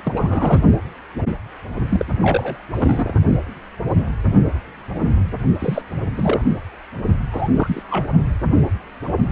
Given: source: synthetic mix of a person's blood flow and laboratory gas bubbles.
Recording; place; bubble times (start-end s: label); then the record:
Doppler ultrasound of blood flow; precordium
0.05-0.13 s: bubbles
0.16-0.62 s: bubbles
1.89-2.05 s: bubbles
2.21-2.64 s: bubbles
2.74-3.14 s: bubbles
5.58-5.82 s: bubbles
6.17-6.42 s: bubbles
7.30-7.49 s: bubbles
7.55-7.83 s: bubbles
7.90-8.06 s: bubbles
From the record:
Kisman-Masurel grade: 222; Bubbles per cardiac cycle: several, 3 to 8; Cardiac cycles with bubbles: 10 to 50%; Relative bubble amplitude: moderate (0.250 to 0.450); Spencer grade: 2 (many but less than half of the cardiac periods contain bubble signals, singularly or in groups); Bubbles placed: only in the low amplitude regions of the cardiac cycle